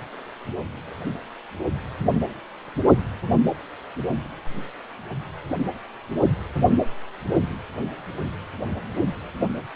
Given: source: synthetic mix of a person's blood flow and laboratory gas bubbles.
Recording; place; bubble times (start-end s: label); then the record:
Doppler ultrasound of blood flow; precordium
no bubbles
From the record:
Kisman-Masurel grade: 000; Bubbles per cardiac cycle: 0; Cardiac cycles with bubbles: 0%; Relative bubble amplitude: no bubbles discernible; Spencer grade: 0 (complete lack of bubble signals)